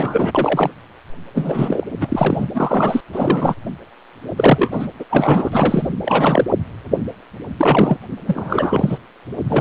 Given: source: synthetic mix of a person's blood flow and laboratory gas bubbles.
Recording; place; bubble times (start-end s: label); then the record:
Doppler ultrasound of blood flow; precordium
0.00-0.31 s: bubbles
0.34-0.71 s: bubbles
1.34-1.84 s: bubbles
2.01-2.49 s: bubbles
2.54-3.01 s: bubbles
3.12-3.55 s: bubbles
4.37-4.87 s: bubbles
4.99-5.04 s: bubbles
5.10-5.88 s: bubbles
6.05-6.44 s: bubbles
7.58-7.97 s: bubbles
8.27-8.98 s: bubbles
9.49-9.61 s: bubbles
From the record:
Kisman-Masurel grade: 333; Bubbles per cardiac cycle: rolling drumbeat, 9 or more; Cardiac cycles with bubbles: 50 to 99%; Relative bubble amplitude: loud (0.450 to 0.775); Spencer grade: 3 (all of the cardiac periods contain showers or single bubble signals, but not dominating or overriding the cardiac motion signals); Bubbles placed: anywhere in the cardiac cycle